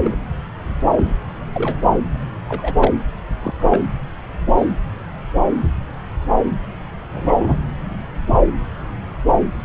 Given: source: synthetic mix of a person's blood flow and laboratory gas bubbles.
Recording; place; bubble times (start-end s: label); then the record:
Doppler ultrasound of blood flow; subclavian vein
0.03-0.18 s: bubbles
0.95-1.15 s: bubbles
1.54-1.76 s: bubbles
2.48-2.91 s: bubbles
3.42-3.54 s: bubbles
3.59-3.86 s: bubbles
4.58-4.66 s: bubbles
7.10-7.58 s: bubbles
From the record:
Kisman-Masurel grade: 122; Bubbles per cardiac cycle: 1 to 2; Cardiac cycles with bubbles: 10 to 50%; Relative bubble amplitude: moderate (0.250 to 0.450); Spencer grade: 2 (many but less than half of the cardiac periods contain bubble signals, singularly or in groups); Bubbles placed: anywhere in the cardiac cycle